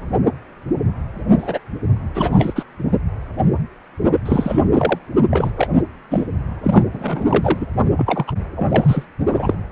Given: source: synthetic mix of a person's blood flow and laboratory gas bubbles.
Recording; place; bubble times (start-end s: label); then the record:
Doppler ultrasound of blood flow; precordium
1.38-1.59 s: bubbles
2.14-2.63 s: bubbles
4.25-4.68 s: bubbles
4.73-4.98 s: bubbles
5.30-5.51 s: bubbles
5.57-5.68 s: bubbles
5.75-5.82 s: bubbles
6.10-6.26 s: bubbles
6.63-6.84 s: bubbles
6.92-7.67 s: bubbles
7.96-8.32 s: bubbles
8.56-9.05 s: bubbles
9.31-9.55 s: bubbles
From the record:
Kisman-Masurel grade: 333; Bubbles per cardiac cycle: rolling drumbeat, 9 or more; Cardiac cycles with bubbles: 50 to 99%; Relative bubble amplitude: loud (0.450 to 0.775); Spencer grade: 3 (all of the cardiac periods contain showers or single bubble signals, but not dominating or overriding the cardiac motion signals); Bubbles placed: only in the low amplitude regions of the cardiac cycle